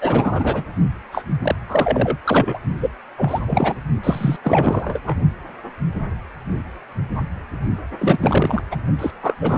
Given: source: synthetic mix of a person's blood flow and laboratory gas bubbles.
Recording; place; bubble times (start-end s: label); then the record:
Doppler ultrasound of blood flow; precordium
0.01-0.65 s: bubbles
1.12-1.23 s: bubbles
1.42-1.55 s: bubbles
1.69-2.18 s: bubbles
2.24-2.59 s: bubbles
2.80-2.89 s: bubbles
3.17-3.40 s: bubbles
3.47-3.77 s: bubbles
4.03-4.36 s: bubbles
4.43-5.00 s: bubbles
5.06-5.17 s: bubbles
7.98-8.62 s: bubbles
8.71-8.76 s: bubbles
8.98-9.11 s: bubbles
9.21-9.33 s: bubbles
9.41-9.58 s: bubbles
From the record:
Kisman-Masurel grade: 333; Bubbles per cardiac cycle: rolling drumbeat, 9 or more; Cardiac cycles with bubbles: 50 to 99%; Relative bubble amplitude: loud (0.450 to 0.775); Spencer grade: 3 (all of the cardiac periods contain showers or single bubble signals, but not dominating or overriding the cardiac motion signals); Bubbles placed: only in the low amplitude regions of the cardiac cycle